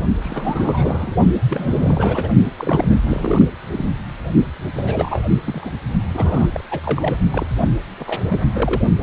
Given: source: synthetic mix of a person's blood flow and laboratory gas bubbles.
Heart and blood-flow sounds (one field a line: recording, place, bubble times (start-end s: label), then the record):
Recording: Doppler ultrasound of blood flow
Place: precordium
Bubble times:
0.21-1.15 s: bubbles
1.48-2.32 s: bubbles
2.58-2.95 s: bubbles
3.03-3.45 s: bubbles
3.73-4.00 s: bubbles
4.73-5.21 s: bubbles
5.29-5.41 s: bubbles
5.45-5.70 s: bubbles
6.14-6.46 s: bubbles
6.52-6.64 s: bubbles
6.71-6.79 s: bubbles
6.83-7.17 s: bubbles
7.33-7.46 s: bubbles
7.59-7.67 s: bubbles
7.99-8.21 s: bubbles
8.29-8.40 s: bubbles
8.53-8.82 s: bubbles
From the record:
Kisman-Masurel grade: 332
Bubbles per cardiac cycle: rolling drumbeat, 9 or more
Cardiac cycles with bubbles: 50 to 99%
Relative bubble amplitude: moderate (0.250 to 0.450)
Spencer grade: 3 (all of the cardiac periods contain showers or single bubble signals, but not dominating or overriding the cardiac motion signals)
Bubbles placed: only in the low amplitude regions of the cardiac cycle